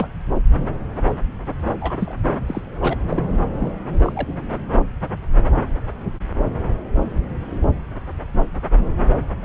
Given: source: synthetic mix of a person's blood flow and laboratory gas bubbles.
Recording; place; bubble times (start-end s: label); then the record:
Doppler ultrasound of blood flow; subclavian vein
0.00-0.08 s: bubbles
0.57-0.74 s: bubbles
1.80-2.15 s: bubbles
2.48-2.62 s: bubbles
2.81-2.96 s: bubbles
3.09-3.23 s: bubbles
3.53-3.72 s: bubbles
4.04-4.33 s: bubbles
From the record:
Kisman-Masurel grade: 221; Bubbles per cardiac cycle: several, 3 to 8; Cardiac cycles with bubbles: 10 to 50%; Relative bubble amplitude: barely perceptible (0.100 to 0.250); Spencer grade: 2 (many but less than half of the cardiac periods contain bubble signals, singularly or in groups); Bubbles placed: anywhere in the cardiac cycle